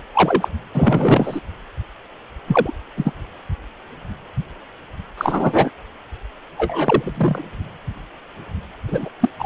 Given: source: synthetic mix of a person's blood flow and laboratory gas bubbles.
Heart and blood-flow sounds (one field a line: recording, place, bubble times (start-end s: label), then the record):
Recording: Doppler ultrasound of blood flow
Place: precordium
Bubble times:
0.14-0.48 s: bubbles
0.74-1.40 s: bubbles
2.47-2.73 s: bubbles
2.96-3.13 s: bubbles
5.17-5.70 s: bubbles
6.58-7.45 s: bubbles
8.88-9.09 s: bubbles
9.20-9.29 s: bubbles
9.38-9.46 s: bubbles
From the record:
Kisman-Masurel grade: 223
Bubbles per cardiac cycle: several, 3 to 8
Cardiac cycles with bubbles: 10 to 50%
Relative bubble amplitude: loud (0.450 to 0.775)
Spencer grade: 2 (many but less than half of the cardiac periods contain bubble signals, singularly or in groups)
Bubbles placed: anywhere in the cardiac cycle